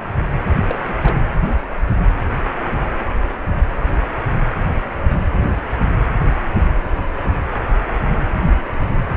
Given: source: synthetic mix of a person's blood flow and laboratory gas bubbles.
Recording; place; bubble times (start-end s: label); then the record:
Doppler ultrasound of blood flow; precordium
0.66-0.77 s: bubbles
0.88-0.94 s: bubbles
1.02-1.16 s: bubbles
From the record:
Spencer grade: 1 (occasional bubble signal discernible with the cardiac motion signal, with majority of cardiac periods free of bubbles); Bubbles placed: anywhere in the cardiac cycle